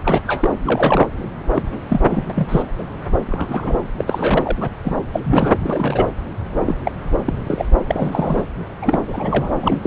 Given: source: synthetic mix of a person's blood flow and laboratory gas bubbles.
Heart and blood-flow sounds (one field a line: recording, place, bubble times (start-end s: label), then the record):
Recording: Doppler ultrasound of blood flow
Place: subclavian vein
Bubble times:
0.04-0.20 s: bubbles
0.27-0.51 s: bubbles
0.63-1.08 s: bubbles
1.54-1.62 s: bubbles
1.90-2.00 s: bubbles
2.08-2.24 s: bubbles
2.28-2.62 s: bubbles
2.78-2.83 s: bubbles
3.27-3.82 s: bubbles
3.98-4.57 s: bubbles
4.61-4.70 s: bubbles
4.84-4.96 s: bubbles
5.12-5.21 s: bubbles
5.24-5.53 s: bubbles
5.60-6.08 s: bubbles
6.66-6.77 s: bubbles
6.85-6.92 s: bubbles
7.25-7.39 s: bubbles
7.47-7.65 s: bubbles
7.89-8.43 s: bubbles
8.82-9.03 s: bubbles
9.08-9.52 s: bubbles
9.61-9.79 s: bubbles
9.83-9.86 s: bubbles
From the record:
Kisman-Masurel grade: 242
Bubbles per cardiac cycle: several, 3 to 8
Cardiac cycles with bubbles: 100%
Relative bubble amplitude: moderate (0.250 to 0.450)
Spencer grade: 3 (all of the cardiac periods contain showers or single bubble signals, but not dominating or overriding the cardiac motion signals)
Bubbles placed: anywhere in the cardiac cycle